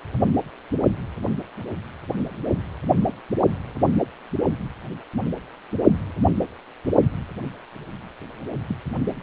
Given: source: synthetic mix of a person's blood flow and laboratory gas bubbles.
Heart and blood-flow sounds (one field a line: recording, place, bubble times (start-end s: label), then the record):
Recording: Doppler ultrasound of blood flow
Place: precordium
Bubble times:
8.69-8.75 s: bubbles
From the record:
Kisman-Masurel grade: 121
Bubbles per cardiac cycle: 1 to 2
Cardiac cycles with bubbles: 10 to 50%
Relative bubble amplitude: barely perceptible (0.100 to 0.250)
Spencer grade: 2 (many but less than half of the cardiac periods contain bubble signals, singularly or in groups)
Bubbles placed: only in the low amplitude regions of the cardiac cycle